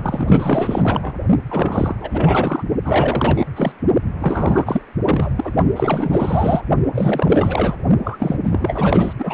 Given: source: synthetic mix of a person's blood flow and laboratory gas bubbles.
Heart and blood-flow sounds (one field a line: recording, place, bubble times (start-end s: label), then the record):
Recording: Doppler ultrasound of blood flow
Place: precordium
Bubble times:
0.02-1.14 s: bubbles
1.49-1.95 s: bubbles
2.00-2.64 s: bubbles
2.84-3.46 s: bubbles
3.56-3.72 s: bubbles
4.19-4.82 s: bubbles
5.04-5.30 s: bubbles
5.36-5.53 s: bubbles
5.76-6.62 s: bubbles
6.94-7.75 s: bubbles
8.04-8.39 s: bubbles
8.44-9.13 s: bubbles
9.18-9.34 s: bubbles
From the record:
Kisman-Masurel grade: 444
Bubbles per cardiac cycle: continuous sound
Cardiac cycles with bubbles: 100%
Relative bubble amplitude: maximal (0.775 to 0.999)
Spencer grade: 4 (maximum detectable bubble signal sounding continuously throughout systole and diastole of every cardiac period, and overriding the amplitude of the normal cardiac signals)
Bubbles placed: only in the low amplitude regions of the cardiac cycle